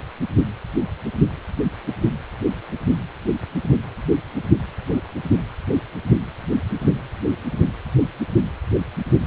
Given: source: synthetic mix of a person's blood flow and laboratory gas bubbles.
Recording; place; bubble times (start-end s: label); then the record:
Doppler ultrasound of blood flow; precordium
no bubbles
From the record:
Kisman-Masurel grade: 000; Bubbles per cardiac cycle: 0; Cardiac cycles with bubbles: 0%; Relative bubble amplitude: no bubbles discernible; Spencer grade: 0 (complete lack of bubble signals)